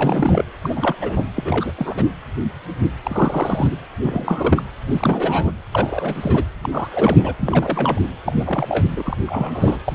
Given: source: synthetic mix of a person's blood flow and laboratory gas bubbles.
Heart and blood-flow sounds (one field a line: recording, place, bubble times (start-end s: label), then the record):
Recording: Doppler ultrasound of blood flow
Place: precordium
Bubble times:
0.00-0.43 s: bubbles
0.62-0.95 s: bubbles
1.00-1.25 s: bubbles
1.36-1.72 s: bubbles
1.75-2.04 s: bubbles
3.03-3.76 s: bubbles
4.03-4.63 s: bubbles
4.89-5.50 s: bubbles
5.72-6.45 s: bubbles
6.62-6.69 s: bubbles
6.71-6.88 s: bubbles
6.92-7.34 s: bubbles
7.39-8.00 s: bubbles
8.26-8.87 s: bubbles
8.91-9.17 s: bubbles
9.26-9.80 s: bubbles
9.87-9.95 s: bubbles
From the record:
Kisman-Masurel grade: 332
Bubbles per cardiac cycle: rolling drumbeat, 9 or more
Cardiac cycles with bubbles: 50 to 99%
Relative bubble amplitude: moderate (0.250 to 0.450)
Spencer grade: 3 (all of the cardiac periods contain showers or single bubble signals, but not dominating or overriding the cardiac motion signals)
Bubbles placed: anywhere in the cardiac cycle